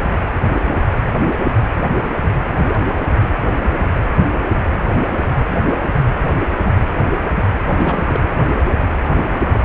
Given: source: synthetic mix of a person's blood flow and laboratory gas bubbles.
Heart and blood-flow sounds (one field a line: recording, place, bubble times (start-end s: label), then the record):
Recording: Doppler ultrasound of blood flow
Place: precordium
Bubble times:
7.64-8.21 s: bubbles
From the record:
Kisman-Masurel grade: 222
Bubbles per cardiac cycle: several, 3 to 8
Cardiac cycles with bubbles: 10 to 50%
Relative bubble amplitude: moderate (0.250 to 0.450)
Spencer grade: 2 (many but less than half of the cardiac periods contain bubble signals, singularly or in groups)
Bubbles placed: anywhere in the cardiac cycle